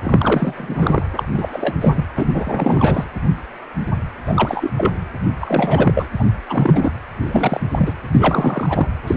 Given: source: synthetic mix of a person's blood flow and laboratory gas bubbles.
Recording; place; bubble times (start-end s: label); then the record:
Doppler ultrasound of blood flow; precordium
0.02-0.53 s: bubbles
0.57-1.04 s: bubbles
1.17-1.24 s: bubbles
1.29-1.77 s: bubbles
1.81-2.05 s: bubbles
2.17-3.04 s: bubbles
4.25-4.71 s: bubbles
4.77-4.95 s: bubbles
5.41-6.07 s: bubbles
6.19-6.25 s: bubbles
6.47-6.91 s: bubbles
7.26-7.60 s: bubbles
7.71-7.93 s: bubbles
8.10-8.87 s: bubbles
9.06-9.17 s: bubbles
From the record:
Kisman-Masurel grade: 333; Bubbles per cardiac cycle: rolling drumbeat, 9 or more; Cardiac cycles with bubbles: 50 to 99%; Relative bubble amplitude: loud (0.450 to 0.775); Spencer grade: 3 (all of the cardiac periods contain showers or single bubble signals, but not dominating or overriding the cardiac motion signals); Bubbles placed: anywhere in the cardiac cycle